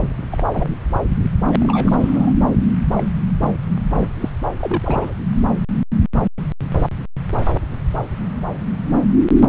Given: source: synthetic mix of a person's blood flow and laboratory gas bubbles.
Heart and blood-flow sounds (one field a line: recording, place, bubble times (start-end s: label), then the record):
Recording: Doppler ultrasound of blood flow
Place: subclavian vein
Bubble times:
0.32-0.46 s: bubbles
0.52-0.74 s: bubbles
1.45-2.33 s: bubbles
2.90-3.04 s: bubbles
3.41-3.52 s: bubbles
3.93-4.07 s: bubbles
4.21-4.29 s: bubbles
4.59-5.13 s: bubbles
From the record:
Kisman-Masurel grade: 222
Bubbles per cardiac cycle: several, 3 to 8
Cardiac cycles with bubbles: 10 to 50%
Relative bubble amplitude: moderate (0.250 to 0.450)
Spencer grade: 2 (many but less than half of the cardiac periods contain bubble signals, singularly or in groups)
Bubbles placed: anywhere in the cardiac cycle